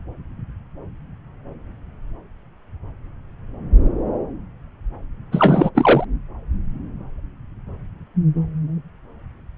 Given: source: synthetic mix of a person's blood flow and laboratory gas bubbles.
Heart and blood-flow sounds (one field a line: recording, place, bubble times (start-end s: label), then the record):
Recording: Doppler ultrasound of blood flow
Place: subclavian vein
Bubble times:
5.31-5.70 s: bubbles
5.75-6.04 s: bubbles
From the record:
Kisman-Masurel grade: 213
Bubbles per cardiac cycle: several, 3 to 8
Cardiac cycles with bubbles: 1 to 10%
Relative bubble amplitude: loud (0.450 to 0.775)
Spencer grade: 1 (occasional bubble signal discernible with the cardiac motion signal, with majority of cardiac periods free of bubbles)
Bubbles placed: anywhere in the cardiac cycle